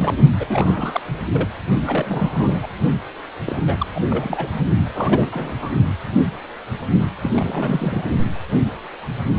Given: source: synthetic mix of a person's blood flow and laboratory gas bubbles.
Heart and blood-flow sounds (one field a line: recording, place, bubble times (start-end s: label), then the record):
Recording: Doppler ultrasound of blood flow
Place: precordium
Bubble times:
0.00-0.15 s: bubbles
0.39-1.01 s: bubbles
1.32-1.50 s: bubbles
1.82-2.67 s: bubbles
3.46-3.60 s: bubbles
3.67-3.86 s: bubbles
3.95-3.99 s: bubbles
4.10-4.54 s: bubbles
4.94-5.55 s: bubbles
5.60-5.70 s: bubbles
7.23-8.04 s: bubbles
From the record:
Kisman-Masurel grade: 332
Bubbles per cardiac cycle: rolling drumbeat, 9 or more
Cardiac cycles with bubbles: 50 to 99%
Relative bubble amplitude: moderate (0.250 to 0.450)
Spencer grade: 3 (all of the cardiac periods contain showers or single bubble signals, but not dominating or overriding the cardiac motion signals)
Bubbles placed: only in the low amplitude regions of the cardiac cycle